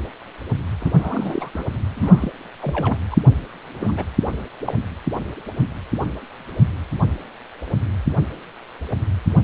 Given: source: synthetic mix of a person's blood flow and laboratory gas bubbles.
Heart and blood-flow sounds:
Doppler ultrasound of blood flow; precordium
0.80-1.50 s: bubbles
1.53-1.65 s: bubbles
1.95-2.31 s: bubbles
2.62-2.97 s: bubbles
3.11-3.17 s: bubbles
3.74-4.04 s: bubbles
4.64-4.74 s: bubbles
From the record:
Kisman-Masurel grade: 221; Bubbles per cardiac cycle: several, 3 to 8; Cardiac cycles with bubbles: 10 to 50%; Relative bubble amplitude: barely perceptible (0.100 to 0.250); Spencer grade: 2 (many but less than half of the cardiac periods contain bubble signals, singularly or in groups); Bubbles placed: anywhere in the cardiac cycle

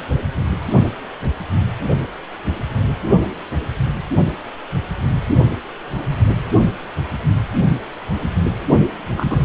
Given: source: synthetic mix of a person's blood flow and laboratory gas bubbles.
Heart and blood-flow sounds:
Doppler ultrasound of blood flow; precordium
9.17-9.45 s: bubbles
From the record:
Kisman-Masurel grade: 113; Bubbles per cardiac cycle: 1 to 2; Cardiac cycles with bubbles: 1 to 10%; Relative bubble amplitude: loud (0.450 to 0.775); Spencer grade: 1 (occasional bubble signal discernible with the cardiac motion signal, with majority of cardiac periods free of bubbles); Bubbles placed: anywhere in the cardiac cycle

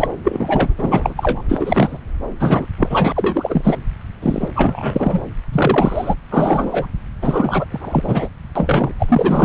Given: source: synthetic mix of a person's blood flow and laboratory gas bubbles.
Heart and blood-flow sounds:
Doppler ultrasound of blood flow; subclavian vein
0.00-0.08 s: bubbles
0.24-0.73 s: bubbles
0.78-1.14 s: bubbles
1.17-1.42 s: bubbles
1.49-1.98 s: bubbles
2.40-2.67 s: bubbles
2.78-3.12 s: bubbles
3.15-3.76 s: bubbles
4.22-4.49 s: bubbles
4.55-5.21 s: bubbles
5.53-6.14 s: bubbles
6.30-6.86 s: bubbles
7.22-7.65 s: bubbles
7.71-8.29 s: bubbles
8.55-8.93 s: bubbles
8.99-9.44 s: bubbles
From the record:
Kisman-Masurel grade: 343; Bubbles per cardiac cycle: rolling drumbeat, 9 or more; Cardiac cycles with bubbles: 100%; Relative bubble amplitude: loud (0.450 to 0.775); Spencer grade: 3 (all of the cardiac periods contain showers or single bubble signals, but not dominating or overriding the cardiac motion signals); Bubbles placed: anywhere in the cardiac cycle

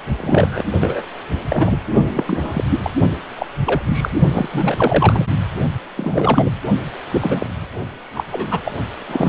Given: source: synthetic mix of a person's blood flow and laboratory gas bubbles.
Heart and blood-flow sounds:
Doppler ultrasound of blood flow; precordium
0.07-0.64 s: bubbles
0.80-1.03 s: bubbles
1.48-1.77 s: bubbles
2.13-2.64 s: bubbles
2.70-2.79 s: bubbles
2.83-2.90 s: bubbles
3.36-3.46 s: bubbles
3.65-4.10 s: bubbles
4.31-4.48 s: bubbles
4.52-5.26 s: bubbles
5.96-6.51 s: bubbles
7.12-7.46 s: bubbles
8.14-8.24 s: bubbles
8.32-8.61 s: bubbles
8.64-8.72 s: bubbles
9.08-9.29 s: bubbles
From the record:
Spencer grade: 3 (all of the cardiac periods contain showers or single bubble signals, but not dominating or overriding the cardiac motion signals); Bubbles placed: only in the low amplitude regions of the cardiac cycle

